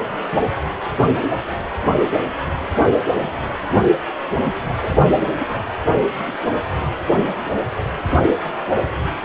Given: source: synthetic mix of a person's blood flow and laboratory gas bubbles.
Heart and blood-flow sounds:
Doppler ultrasound of blood flow; precordium
4.79-4.96 s: bubbles
5.14-5.19 s: bubbles
5.40-5.61 s: bubbles
From the record:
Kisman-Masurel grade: 211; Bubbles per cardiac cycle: several, 3 to 8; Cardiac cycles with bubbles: 1 to 10%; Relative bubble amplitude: barely perceptible (0.100 to 0.250); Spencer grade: 1 (occasional bubble signal discernible with the cardiac motion signal, with majority of cardiac periods free of bubbles); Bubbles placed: anywhere in the cardiac cycle

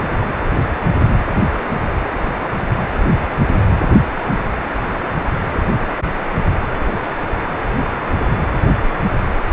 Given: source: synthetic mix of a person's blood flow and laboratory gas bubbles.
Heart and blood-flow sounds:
Doppler ultrasound of blood flow; precordium
no bubbles
From the record:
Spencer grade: 0 (complete lack of bubble signals)

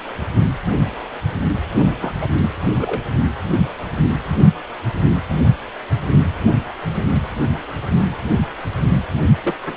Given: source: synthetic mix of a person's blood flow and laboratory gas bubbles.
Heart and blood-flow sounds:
Doppler ultrasound of blood flow; precordium
2.00-2.12 s: bubbles
2.15-2.50 s: bubbles
2.79-3.04 s: bubbles
9.44-9.55 s: bubbles
9.66-9.77 s: bubbles
From the record:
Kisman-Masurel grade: 222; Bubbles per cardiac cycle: several, 3 to 8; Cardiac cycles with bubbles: 10 to 50%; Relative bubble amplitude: moderate (0.250 to 0.450); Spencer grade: 2 (many but less than half of the cardiac periods contain bubble signals, singularly or in groups); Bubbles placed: only in the low amplitude regions of the cardiac cycle

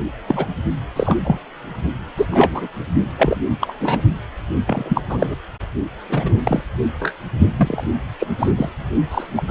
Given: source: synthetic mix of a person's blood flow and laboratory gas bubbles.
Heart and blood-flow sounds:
Doppler ultrasound of blood flow; precordium
0.28-0.47 s: bubbles
0.96-1.17 s: bubbles
1.23-1.39 s: bubbles
2.16-2.29 s: bubbles
2.31-2.68 s: bubbles
3.18-3.39 s: bubbles
3.60-4.02 s: bubbles
4.66-5.03 s: bubbles
5.09-5.34 s: bubbles
6.09-6.36 s: bubbles
6.44-6.62 s: bubbles
7.00-7.13 s: bubbles
7.56-7.83 s: bubbles
8.19-8.27 s: bubbles
8.38-8.51 s: bubbles
8.56-8.69 s: bubbles
9.11-9.27 s: bubbles
9.36-9.43 s: bubbles
9.47-9.51 s: bubbles
From the record:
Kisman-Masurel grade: 233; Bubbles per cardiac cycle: several, 3 to 8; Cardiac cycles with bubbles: 50 to 99%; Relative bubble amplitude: loud (0.450 to 0.775); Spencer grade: 3 (all of the cardiac periods contain showers or single bubble signals, but not dominating or overriding the cardiac motion signals); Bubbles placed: only in the low amplitude regions of the cardiac cycle

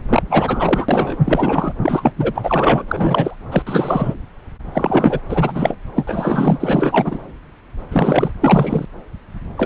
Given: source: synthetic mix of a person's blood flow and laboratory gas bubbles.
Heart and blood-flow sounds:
Doppler ultrasound of blood flow; subclavian vein
0.08-0.22 s: bubbles
0.30-1.16 s: bubbles
1.24-1.72 s: bubbles
1.81-2.12 s: bubbles
2.17-2.33 s: bubbles
2.35-3.36 s: bubbles
3.51-3.62 s: bubbles
3.67-4.14 s: bubbles
4.72-5.20 s: bubbles
5.29-5.76 s: bubbles
5.95-7.19 s: bubbles
7.91-8.32 s: bubbles
8.41-8.86 s: bubbles
9.57-9.66 s: bubbles
From the record:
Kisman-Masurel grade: 333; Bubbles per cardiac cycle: rolling drumbeat, 9 or more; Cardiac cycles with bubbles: 50 to 99%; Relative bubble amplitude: loud (0.450 to 0.775); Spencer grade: 3 (all of the cardiac periods contain showers or single bubble signals, but not dominating or overriding the cardiac motion signals); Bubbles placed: anywhere in the cardiac cycle

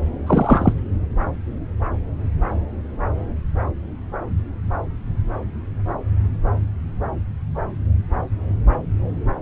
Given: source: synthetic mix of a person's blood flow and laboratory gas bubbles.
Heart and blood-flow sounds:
Doppler ultrasound of blood flow; subclavian vein
0.27-0.72 s: bubbles
From the record:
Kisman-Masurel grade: 113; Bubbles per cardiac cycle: 1 to 2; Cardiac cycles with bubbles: 1 to 10%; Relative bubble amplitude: loud (0.450 to 0.775); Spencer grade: 1 (occasional bubble signal discernible with the cardiac motion signal, with majority of cardiac periods free of bubbles); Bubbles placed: anywhere in the cardiac cycle

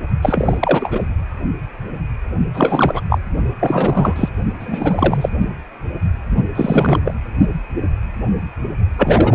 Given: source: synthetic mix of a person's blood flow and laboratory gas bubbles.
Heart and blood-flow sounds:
Doppler ultrasound of blood flow; precordium
0.22-0.57 s: bubbles
0.60-1.03 s: bubbles
2.54-3.02 s: bubbles
3.09-3.19 s: bubbles
3.60-4.29 s: bubbles
4.59-5.29 s: bubbles
6.54-7.00 s: bubbles
7.04-7.14 s: bubbles
8.97-9.35 s: bubbles
From the record:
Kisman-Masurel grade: 333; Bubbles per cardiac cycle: rolling drumbeat, 9 or more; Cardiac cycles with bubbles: 50 to 99%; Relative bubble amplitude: loud (0.450 to 0.775); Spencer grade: 3 (all of the cardiac periods contain showers or single bubble signals, but not dominating or overriding the cardiac motion signals); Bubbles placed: only in the low amplitude regions of the cardiac cycle

